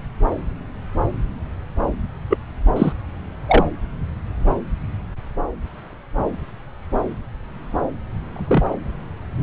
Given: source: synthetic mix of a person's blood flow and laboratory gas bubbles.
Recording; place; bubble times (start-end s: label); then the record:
Doppler ultrasound of blood flow; subclavian vein
2.29-2.38 s: bubbles
2.76-2.92 s: bubbles
3.48-3.64 s: bubbles
8.34-8.71 s: bubbles
From the record:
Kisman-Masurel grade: 123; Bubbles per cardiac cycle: 1 to 2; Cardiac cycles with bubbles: 10 to 50%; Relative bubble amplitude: loud (0.450 to 0.775); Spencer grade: 2 (many but less than half of the cardiac periods contain bubble signals, singularly or in groups); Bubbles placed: anywhere in the cardiac cycle